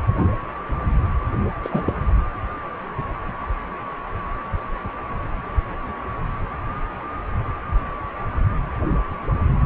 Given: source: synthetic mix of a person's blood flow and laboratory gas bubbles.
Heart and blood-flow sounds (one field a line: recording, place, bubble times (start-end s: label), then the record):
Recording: Doppler ultrasound of blood flow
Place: precordium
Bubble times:
1.62-1.94 s: bubbles
From the record:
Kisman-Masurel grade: 211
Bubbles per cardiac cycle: several, 3 to 8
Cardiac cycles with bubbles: 1 to 10%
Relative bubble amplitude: barely perceptible (0.100 to 0.250)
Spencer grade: 1 (occasional bubble signal discernible with the cardiac motion signal, with majority of cardiac periods free of bubbles)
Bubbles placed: anywhere in the cardiac cycle